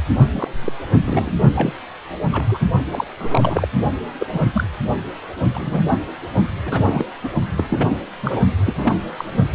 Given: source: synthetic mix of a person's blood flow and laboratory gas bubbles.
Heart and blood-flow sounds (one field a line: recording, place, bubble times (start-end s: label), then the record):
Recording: Doppler ultrasound of blood flow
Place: precordium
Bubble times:
0.33-0.48 s: bubbles
0.61-0.73 s: bubbles
1.06-1.32 s: bubbles
1.55-1.77 s: bubbles
2.31-2.58 s: bubbles
2.91-3.05 s: bubbles
3.19-3.68 s: bubbles
4.18-4.27 s: bubbles
4.32-4.44 s: bubbles
4.54-4.63 s: bubbles
5.54-5.85 s: bubbles
5.88-5.98 s: bubbles
6.65-7.05 s: bubbles
7.23-7.29 s: bubbles
7.57-8.02 s: bubbles
8.22-8.41 s: bubbles
8.65-8.97 s: bubbles
9.16-9.24 s: bubbles
9.32-9.47 s: bubbles
From the record:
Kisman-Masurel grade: 242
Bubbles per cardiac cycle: several, 3 to 8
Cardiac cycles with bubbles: 100%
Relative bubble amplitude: moderate (0.250 to 0.450)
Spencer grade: 3 (all of the cardiac periods contain showers or single bubble signals, but not dominating or overriding the cardiac motion signals)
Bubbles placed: only in the low amplitude regions of the cardiac cycle